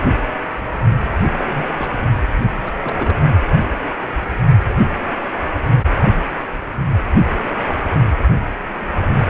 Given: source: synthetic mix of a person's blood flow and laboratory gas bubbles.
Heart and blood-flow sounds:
Doppler ultrasound of blood flow; precordium
1.30-1.66 s: bubbles
1.77-1.96 s: bubbles
2.65-2.73 s: bubbles
2.83-3.17 s: bubbles
From the record:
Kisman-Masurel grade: 221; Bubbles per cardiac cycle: several, 3 to 8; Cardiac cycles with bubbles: 10 to 50%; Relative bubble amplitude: barely perceptible (0.100 to 0.250); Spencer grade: 2 (many but less than half of the cardiac periods contain bubble signals, singularly or in groups); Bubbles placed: anywhere in the cardiac cycle

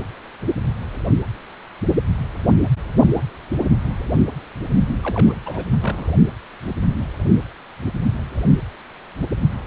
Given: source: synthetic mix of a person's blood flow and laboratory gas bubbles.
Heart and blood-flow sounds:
Doppler ultrasound of blood flow; precordium
5.03-5.34 s: bubbles
5.46-5.64 s: bubbles
5.80-6.08 s: bubbles
From the record:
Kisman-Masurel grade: 211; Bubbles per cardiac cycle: several, 3 to 8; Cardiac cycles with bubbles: 1 to 10%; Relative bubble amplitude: barely perceptible (0.100 to 0.250); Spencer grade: 1 (occasional bubble signal discernible with the cardiac motion signal, with majority of cardiac periods free of bubbles); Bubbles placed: only in the low amplitude regions of the cardiac cycle

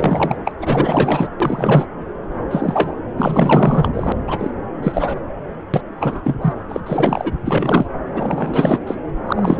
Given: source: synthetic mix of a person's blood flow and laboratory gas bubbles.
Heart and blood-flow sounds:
Doppler ultrasound of blood flow; subclavian vein
0.00-0.37 s: bubbles
0.45-0.54 s: bubbles
0.58-1.28 s: bubbles
1.40-1.86 s: bubbles
2.50-2.96 s: bubbles
3.17-4.12 s: bubbles
4.27-4.52 s: bubbles
4.82-5.21 s: bubbles
5.74-5.81 s: bubbles
5.99-6.36 s: bubbles
6.41-6.54 s: bubbles
6.68-6.81 s: bubbles
6.86-7.32 s: bubbles
7.45-7.87 s: bubbles
8.13-8.79 s: bubbles
8.87-8.95 s: bubbles
9.27-9.60 s: bubbles
From the record:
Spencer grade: 4 (maximum detectable bubble signal sounding continuously throughout systole and diastole of every cardiac period, and overriding the amplitude of the normal cardiac signals); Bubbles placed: anywhere in the cardiac cycle

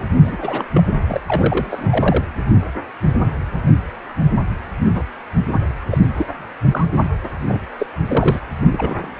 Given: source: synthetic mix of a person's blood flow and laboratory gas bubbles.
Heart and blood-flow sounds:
Doppler ultrasound of blood flow; precordium
0.22-0.37 s: bubbles
0.40-0.65 s: bubbles
0.74-0.82 s: bubbles
1.08-1.21 s: bubbles
1.26-2.24 s: bubbles
4.94-5.04 s: bubbles
5.53-5.61 s: bubbles
5.91-5.98 s: bubbles
6.17-6.27 s: bubbles
6.70-6.92 s: bubbles
7.47-7.62 s: bubbles
7.79-7.87 s: bubbles
8.08-8.40 s: bubbles
8.61-9.09 s: bubbles
From the record:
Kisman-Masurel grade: 232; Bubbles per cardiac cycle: several, 3 to 8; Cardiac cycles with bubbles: 50 to 99%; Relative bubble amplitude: moderate (0.250 to 0.450); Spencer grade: 3 (all of the cardiac periods contain showers or single bubble signals, but not dominating or overriding the cardiac motion signals); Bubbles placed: anywhere in the cardiac cycle

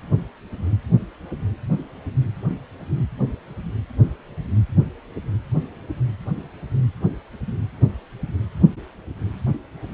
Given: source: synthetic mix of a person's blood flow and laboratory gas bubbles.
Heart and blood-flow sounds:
Doppler ultrasound of blood flow; precordium
2.49-2.55 s: bubbles
From the record:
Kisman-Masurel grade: 112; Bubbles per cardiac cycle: 1 to 2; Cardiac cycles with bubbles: 1 to 10%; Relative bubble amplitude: moderate (0.250 to 0.450); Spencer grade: 1 (occasional bubble signal discernible with the cardiac motion signal, with majority of cardiac periods free of bubbles); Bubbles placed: anywhere in the cardiac cycle

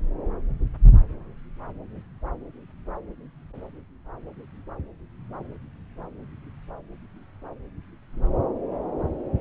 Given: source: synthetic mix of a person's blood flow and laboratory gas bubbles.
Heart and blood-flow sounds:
Doppler ultrasound of blood flow; subclavian vein
no bubbles
From the record:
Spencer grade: 0 (complete lack of bubble signals)

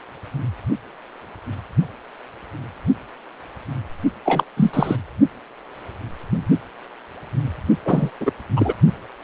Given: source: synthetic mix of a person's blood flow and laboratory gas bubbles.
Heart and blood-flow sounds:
Doppler ultrasound of blood flow; precordium
4.25-4.43 s: bubbles
4.57-4.96 s: bubbles
7.84-8.11 s: bubbles
8.20-8.32 s: bubbles
8.56-8.74 s: bubbles
From the record:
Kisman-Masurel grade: 223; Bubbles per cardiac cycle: several, 3 to 8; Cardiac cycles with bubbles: 10 to 50%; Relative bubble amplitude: loud (0.450 to 0.775); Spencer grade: 2 (many but less than half of the cardiac periods contain bubble signals, singularly or in groups); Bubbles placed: only in the low amplitude regions of the cardiac cycle

